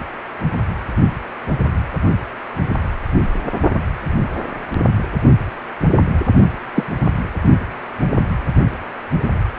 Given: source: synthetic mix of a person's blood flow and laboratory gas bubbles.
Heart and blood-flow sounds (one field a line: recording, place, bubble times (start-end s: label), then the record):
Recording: Doppler ultrasound of blood flow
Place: precordium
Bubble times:
6.75-6.87 s: bubbles
From the record:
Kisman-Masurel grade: 123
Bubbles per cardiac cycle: 1 to 2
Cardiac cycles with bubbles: 10 to 50%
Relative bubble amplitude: loud (0.450 to 0.775)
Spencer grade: 2 (many but less than half of the cardiac periods contain bubble signals, singularly or in groups)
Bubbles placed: anywhere in the cardiac cycle